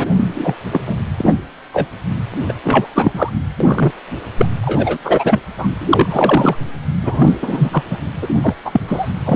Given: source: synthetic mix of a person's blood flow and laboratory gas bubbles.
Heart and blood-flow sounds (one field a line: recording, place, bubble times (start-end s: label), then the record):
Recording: Doppler ultrasound of blood flow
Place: precordium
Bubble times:
0.00-0.06 s: bubbles
0.16-0.55 s: bubbles
0.72-0.81 s: bubbles
0.86-0.97 s: bubbles
1.17-1.33 s: bubbles
1.73-1.86 s: bubbles
2.48-2.52 s: bubbles
2.64-2.87 s: bubbles
2.95-3.29 s: bubbles
3.60-3.92 s: bubbles
4.38-4.46 s: bubbles
4.62-4.97 s: bubbles
5.04-5.39 s: bubbles
5.58-5.67 s: bubbles
5.78-6.57 s: bubbles
7.02-7.33 s: bubbles
7.42-7.70 s: bubbles
7.72-7.83 s: bubbles
7.89-7.97 s: bubbles
8.21-8.28 s: bubbles
8.36-8.54 s: bubbles
8.64-8.80 s: bubbles
8.87-9.13 s: bubbles
9.25-9.36 s: bubbles
From the record:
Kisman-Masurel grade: 243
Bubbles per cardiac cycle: several, 3 to 8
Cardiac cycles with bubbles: 100%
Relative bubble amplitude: loud (0.450 to 0.775)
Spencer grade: 3 (all of the cardiac periods contain showers or single bubble signals, but not dominating or overriding the cardiac motion signals)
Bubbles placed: anywhere in the cardiac cycle